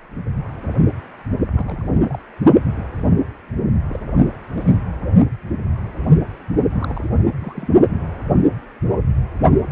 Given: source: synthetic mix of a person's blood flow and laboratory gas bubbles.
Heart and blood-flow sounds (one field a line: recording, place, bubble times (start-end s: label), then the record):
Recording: Doppler ultrasound of blood flow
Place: precordium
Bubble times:
1.54-2.21 s: bubbles
3.89-4.00 s: bubbles
4.54-4.78 s: bubbles
6.71-7.09 s: bubbles
7.19-7.22 s: bubbles
7.39-7.67 s: bubbles
From the record:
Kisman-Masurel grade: 221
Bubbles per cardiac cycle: several, 3 to 8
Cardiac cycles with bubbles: 10 to 50%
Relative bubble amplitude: barely perceptible (0.100 to 0.250)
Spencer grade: 2 (many but less than half of the cardiac periods contain bubble signals, singularly or in groups)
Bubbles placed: only in the low amplitude regions of the cardiac cycle